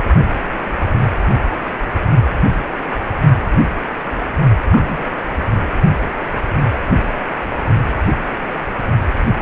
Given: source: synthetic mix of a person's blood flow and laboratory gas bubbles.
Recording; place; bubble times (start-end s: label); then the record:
Doppler ultrasound of blood flow; precordium
0.00-0.05 s: bubbles
4.71-5.04 s: bubbles
6.73-6.78 s: bubbles
From the record:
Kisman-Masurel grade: 122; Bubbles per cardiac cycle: 1 to 2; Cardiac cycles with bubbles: 10 to 50%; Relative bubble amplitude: moderate (0.250 to 0.450); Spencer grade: 2 (many but less than half of the cardiac periods contain bubble signals, singularly or in groups); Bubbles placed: only in the low amplitude regions of the cardiac cycle